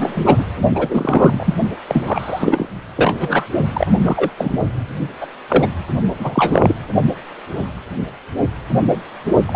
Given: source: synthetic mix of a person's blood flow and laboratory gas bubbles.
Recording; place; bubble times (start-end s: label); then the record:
Doppler ultrasound of blood flow; precordium
0.00-0.22 s: bubbles
0.25-0.46 s: bubbles
0.74-1.54 s: bubbles
1.88-2.66 s: bubbles
2.97-3.45 s: bubbles
3.73-3.87 s: bubbles
4.02-4.30 s: bubbles
4.37-4.58 s: bubbles
5.21-5.27 s: bubbles
5.48-5.68 s: bubbles
6.19-6.75 s: bubbles
9.46-9.56 s: bubbles
From the record:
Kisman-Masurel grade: 233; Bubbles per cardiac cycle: several, 3 to 8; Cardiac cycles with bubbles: 50 to 99%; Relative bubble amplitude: loud (0.450 to 0.775); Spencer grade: 3 (all of the cardiac periods contain showers or single bubble signals, but not dominating or overriding the cardiac motion signals); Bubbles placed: only in the low amplitude regions of the cardiac cycle